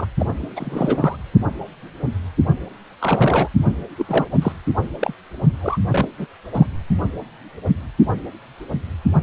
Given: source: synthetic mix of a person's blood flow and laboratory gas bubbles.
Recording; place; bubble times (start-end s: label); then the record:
Doppler ultrasound of blood flow; precordium
0.00-0.07 s: bubbles
0.19-0.26 s: bubbles
0.42-0.46 s: bubbles
0.56-1.17 s: bubbles
3.00-3.48 s: bubbles
3.97-4.25 s: bubbles
4.42-4.53 s: bubbles
5.00-5.13 s: bubbles
5.61-5.79 s: bubbles
5.91-6.08 s: bubbles
6.18-6.26 s: bubbles
6.54-6.67 s: bubbles
From the record:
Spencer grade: 2 (many but less than half of the cardiac periods contain bubble signals, singularly or in groups); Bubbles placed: only in the low amplitude regions of the cardiac cycle